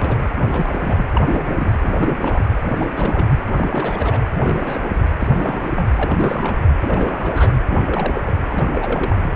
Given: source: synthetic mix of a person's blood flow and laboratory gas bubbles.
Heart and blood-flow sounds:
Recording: Doppler ultrasound of blood flow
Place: precordium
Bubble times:
0.00-0.22 s: bubbles
0.42-0.47 s: bubbles
0.51-1.06 s: bubbles
1.13-1.24 s: bubbles
1.26-1.73 s: bubbles
1.81-2.18 s: bubbles
2.22-2.45 s: bubbles
2.62-2.87 s: bubbles
2.94-3.27 s: bubbles
3.52-4.19 s: bubbles
4.33-4.89 s: bubbles
5.19-5.28 s: bubbles
5.34-5.88 s: bubbles
5.96-6.58 s: bubbles
6.80-7.53 s: bubbles
7.61-8.35 s: bubbles
8.50-8.64 s: bubbles
8.72-9.24 s: bubbles
From the record:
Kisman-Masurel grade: 342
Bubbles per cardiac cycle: rolling drumbeat, 9 or more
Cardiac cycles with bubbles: 100%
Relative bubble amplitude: moderate (0.250 to 0.450)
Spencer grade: 3 (all of the cardiac periods contain showers or single bubble signals, but not dominating or overriding the cardiac motion signals)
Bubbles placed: anywhere in the cardiac cycle

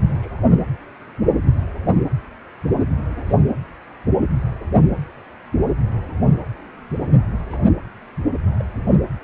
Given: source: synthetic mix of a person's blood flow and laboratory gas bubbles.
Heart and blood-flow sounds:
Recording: Doppler ultrasound of blood flow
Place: precordium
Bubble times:
0.04-0.51 s: bubbles
2.96-3.38 s: bubbles
7.39-7.44 s: bubbles
7.49-7.58 s: bubbles
8.59-8.65 s: bubbles
8.92-8.96 s: bubbles
From the record:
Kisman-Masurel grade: 121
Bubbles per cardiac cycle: 1 to 2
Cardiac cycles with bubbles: 10 to 50%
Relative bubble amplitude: barely perceptible (0.100 to 0.250)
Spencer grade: 2 (many but less than half of the cardiac periods contain bubble signals, singularly or in groups)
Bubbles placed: anywhere in the cardiac cycle

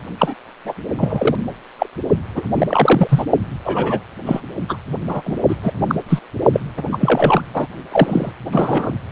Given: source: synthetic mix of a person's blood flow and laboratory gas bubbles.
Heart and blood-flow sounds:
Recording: Doppler ultrasound of blood flow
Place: precordium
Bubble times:
0.17-0.37 s: bubbles
0.65-0.74 s: bubbles
0.98-1.35 s: bubbles
1.79-1.86 s: bubbles
2.34-2.43 s: bubbles
2.55-3.25 s: bubbles
3.64-4.00 s: bubbles
4.25-4.41 s: bubbles
4.68-4.76 s: bubbles
5.08-5.22 s: bubbles
5.25-5.37 s: bubbles
5.48-5.55 s: bubbles
5.62-5.72 s: bubbles
5.88-5.95 s: bubbles
6.08-6.19 s: bubbles
6.53-6.60 s: bubbles
6.77-6.82 s: bubbles
6.92-6.98 s: bubbles
7.00-7.42 s: bubbles
7.54-7.67 s: bubbles
7.92-8.32 s: bubbles
8.52-8.93 s: bubbles
From the record:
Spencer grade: 3 (all of the cardiac periods contain showers or single bubble signals, but not dominating or overriding the cardiac motion signals)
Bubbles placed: only in the low amplitude regions of the cardiac cycle

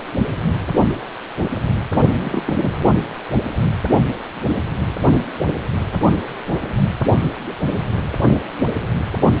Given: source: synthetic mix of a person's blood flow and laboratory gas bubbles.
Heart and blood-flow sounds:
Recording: Doppler ultrasound of blood flow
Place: precordium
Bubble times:
2.19-2.43 s: bubbles
2.47-2.73 s: bubbles
From the record:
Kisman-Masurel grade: 212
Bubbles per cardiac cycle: several, 3 to 8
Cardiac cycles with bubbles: 1 to 10%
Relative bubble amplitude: moderate (0.250 to 0.450)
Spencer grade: 1 (occasional bubble signal discernible with the cardiac motion signal, with majority of cardiac periods free of bubbles)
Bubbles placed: only in the low amplitude regions of the cardiac cycle

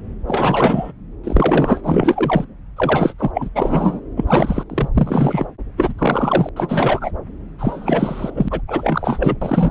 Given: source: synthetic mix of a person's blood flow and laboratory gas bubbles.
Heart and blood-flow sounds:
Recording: Doppler ultrasound of blood flow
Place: subclavian vein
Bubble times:
0.28-0.92 s: bubbles
1.23-1.81 s: bubbles
1.83-2.44 s: bubbles
2.77-3.13 s: bubbles
3.18-3.31 s: bubbles
3.33-3.49 s: bubbles
3.55-4.00 s: bubbles
4.17-4.64 s: bubbles
4.70-4.89 s: bubbles
4.95-5.47 s: bubbles
5.77-5.93 s: bubbles
5.98-6.49 s: bubbles
6.56-7.12 s: bubbles
7.58-8.61 s: bubbles
8.67-9.36 s: bubbles
9.41-9.71 s: bubbles
From the record:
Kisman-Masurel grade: 343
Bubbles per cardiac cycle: rolling drumbeat, 9 or more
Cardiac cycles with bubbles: 100%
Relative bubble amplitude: loud (0.450 to 0.775)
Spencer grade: 3 (all of the cardiac periods contain showers or single bubble signals, but not dominating or overriding the cardiac motion signals)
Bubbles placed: anywhere in the cardiac cycle

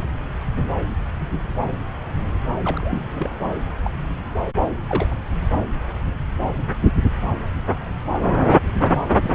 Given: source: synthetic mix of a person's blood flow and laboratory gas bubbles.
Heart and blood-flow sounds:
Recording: Doppler ultrasound of blood flow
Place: subclavian vein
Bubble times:
2.62-3.00 s: bubbles
3.12-3.30 s: bubbles
3.85-3.90 s: bubbles
4.88-5.07 s: bubbles
5.10-5.14 s: bubbles
8.81-8.88 s: bubbles
9.21-9.35 s: bubbles
From the record:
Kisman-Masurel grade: 221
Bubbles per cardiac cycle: several, 3 to 8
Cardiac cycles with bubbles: 10 to 50%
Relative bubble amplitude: barely perceptible (0.100 to 0.250)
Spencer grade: 2 (many but less than half of the cardiac periods contain bubble signals, singularly or in groups)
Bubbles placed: anywhere in the cardiac cycle

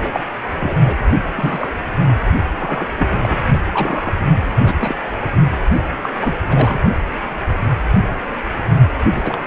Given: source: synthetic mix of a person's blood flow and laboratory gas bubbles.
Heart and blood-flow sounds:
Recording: Doppler ultrasound of blood flow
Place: precordium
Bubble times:
0.00-0.24 s: bubbles
0.57-0.96 s: bubbles
1.36-1.68 s: bubbles
2.05-2.13 s: bubbles
2.60-2.96 s: bubbles
2.98-3.17 s: bubbles
3.21-3.36 s: bubbles
3.53-3.61 s: bubbles
3.72-4.15 s: bubbles
4.65-4.75 s: bubbles
4.79-4.95 s: bubbles
5.32-5.43 s: bubbles
6.03-6.11 s: bubbles
6.21-6.35 s: bubbles
6.40-6.79 s: bubbles
9.12-9.44 s: bubbles
From the record:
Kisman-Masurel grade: 232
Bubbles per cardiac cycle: several, 3 to 8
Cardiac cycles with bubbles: 50 to 99%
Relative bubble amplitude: moderate (0.250 to 0.450)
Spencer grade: 3 (all of the cardiac periods contain showers or single bubble signals, but not dominating or overriding the cardiac motion signals)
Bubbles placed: only in the low amplitude regions of the cardiac cycle

